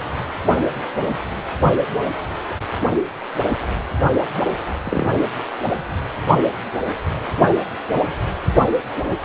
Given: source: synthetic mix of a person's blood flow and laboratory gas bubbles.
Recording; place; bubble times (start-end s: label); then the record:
Doppler ultrasound of blood flow; precordium
4.83-5.06 s: bubbles
From the record:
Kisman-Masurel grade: 112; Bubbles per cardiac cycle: 1 to 2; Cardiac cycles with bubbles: 1 to 10%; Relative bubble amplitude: moderate (0.250 to 0.450); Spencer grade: 1 (occasional bubble signal discernible with the cardiac motion signal, with majority of cardiac periods free of bubbles); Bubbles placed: anywhere in the cardiac cycle